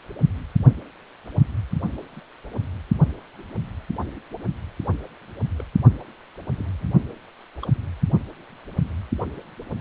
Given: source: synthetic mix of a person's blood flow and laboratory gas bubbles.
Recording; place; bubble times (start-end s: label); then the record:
Doppler ultrasound of blood flow; precordium
2.16-2.23 s: bubbles
5.57-5.64 s: bubbles
6.00-6.02 s: bubbles
6.54-6.87 s: bubbles
7.62-7.71 s: bubbles
From the record:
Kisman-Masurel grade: 121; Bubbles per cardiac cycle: 1 to 2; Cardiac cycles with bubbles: 10 to 50%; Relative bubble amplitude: barely perceptible (0.100 to 0.250); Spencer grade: 2 (many but less than half of the cardiac periods contain bubble signals, singularly or in groups); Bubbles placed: only in the low amplitude regions of the cardiac cycle